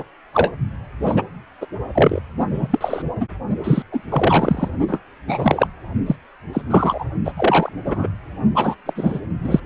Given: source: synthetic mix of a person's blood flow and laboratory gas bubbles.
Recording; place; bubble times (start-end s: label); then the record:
Doppler ultrasound of blood flow; precordium
0.00-0.04 s: bubbles
0.33-0.52 s: bubbles
1.03-1.22 s: bubbles
1.61-1.66 s: bubbles
1.94-2.20 s: bubbles
2.50-2.67 s: bubbles
2.70-3.02 s: bubbles
3.20-3.25 s: bubbles
3.63-3.83 s: bubbles
3.92-4.00 s: bubbles
4.08-4.68 s: bubbles
4.88-5.01 s: bubbles
5.26-5.67 s: bubbles
6.06-6.16 s: bubbles
6.53-6.62 s: bubbles
6.70-7.04 s: bubbles
7.25-7.32 s: bubbles
7.37-7.70 s: bubbles
7.85-8.09 s: bubbles
8.55-8.76 s: bubbles
8.86-9.21 s: bubbles
9.44-9.60 s: bubbles
From the record:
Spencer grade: 3 (all of the cardiac periods contain showers or single bubble signals, but not dominating or overriding the cardiac motion signals); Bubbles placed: only in the low amplitude regions of the cardiac cycle